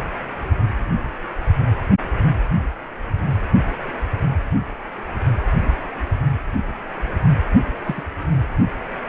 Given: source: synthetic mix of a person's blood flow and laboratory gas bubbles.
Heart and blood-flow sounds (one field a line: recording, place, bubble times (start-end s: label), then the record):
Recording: Doppler ultrasound of blood flow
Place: precordium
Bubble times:
7.84-8.04 s: bubbles
From the record:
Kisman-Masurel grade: 121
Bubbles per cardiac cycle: 1 to 2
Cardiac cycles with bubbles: 10 to 50%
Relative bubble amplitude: barely perceptible (0.100 to 0.250)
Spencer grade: 2 (many but less than half of the cardiac periods contain bubble signals, singularly or in groups)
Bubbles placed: anywhere in the cardiac cycle